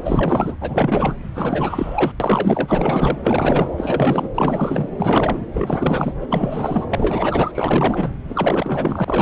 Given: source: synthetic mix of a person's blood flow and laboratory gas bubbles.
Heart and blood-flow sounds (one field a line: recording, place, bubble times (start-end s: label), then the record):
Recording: Doppler ultrasound of blood flow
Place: subclavian vein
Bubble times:
0.04-0.56 s: bubbles
0.60-1.15 s: bubbles
1.34-2.13 s: bubbles
2.20-3.18 s: bubbles
3.23-3.69 s: bubbles
3.77-4.29 s: bubbles
4.34-4.89 s: bubbles
4.96-5.46 s: bubbles
5.53-6.13 s: bubbles
6.20-6.26 s: bubbles
6.29-6.86 s: bubbles
6.89-7.51 s: bubbles
7.54-8.12 s: bubbles
8.29-9.22 s: bubbles
From the record:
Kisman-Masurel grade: 444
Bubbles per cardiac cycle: continuous sound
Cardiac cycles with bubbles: 100%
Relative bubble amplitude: maximal (0.775 to 0.999)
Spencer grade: 4 (maximum detectable bubble signal sounding continuously throughout systole and diastole of every cardiac period, and overriding the amplitude of the normal cardiac signals)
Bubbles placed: anywhere in the cardiac cycle